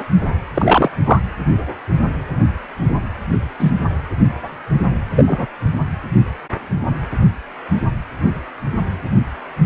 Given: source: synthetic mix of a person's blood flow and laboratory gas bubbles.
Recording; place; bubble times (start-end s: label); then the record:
Doppler ultrasound of blood flow; precordium
0.00-0.03 s: bubbles
0.54-0.91 s: bubbles
1.06-1.20 s: bubbles
3.59-3.71 s: bubbles
5.16-5.46 s: bubbles
From the record:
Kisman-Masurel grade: 123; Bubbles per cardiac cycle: 1 to 2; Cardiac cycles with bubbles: 10 to 50%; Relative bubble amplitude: loud (0.450 to 0.775); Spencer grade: 2 (many but less than half of the cardiac periods contain bubble signals, singularly or in groups); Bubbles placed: anywhere in the cardiac cycle